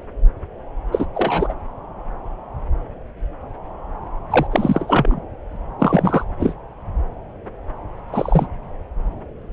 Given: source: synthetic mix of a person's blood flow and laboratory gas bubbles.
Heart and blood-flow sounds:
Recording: Doppler ultrasound of blood flow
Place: subclavian vein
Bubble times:
0.92-1.06 s: bubbles
1.15-1.54 s: bubbles
4.30-4.47 s: bubbles
4.51-5.20 s: bubbles
5.79-6.25 s: bubbles
6.39-6.55 s: bubbles
8.12-8.47 s: bubbles
From the record:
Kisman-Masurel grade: 223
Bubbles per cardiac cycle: several, 3 to 8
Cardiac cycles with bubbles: 10 to 50%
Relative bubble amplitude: loud (0.450 to 0.775)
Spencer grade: 2 (many but less than half of the cardiac periods contain bubble signals, singularly or in groups)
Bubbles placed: anywhere in the cardiac cycle

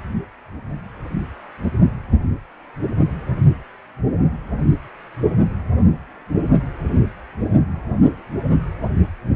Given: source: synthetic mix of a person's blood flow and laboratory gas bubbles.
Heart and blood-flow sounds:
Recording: Doppler ultrasound of blood flow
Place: precordium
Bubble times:
no bubbles
From the record:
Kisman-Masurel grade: 000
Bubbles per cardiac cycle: 0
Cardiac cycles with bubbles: 0%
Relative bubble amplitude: no bubbles discernible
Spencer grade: 0 (complete lack of bubble signals)

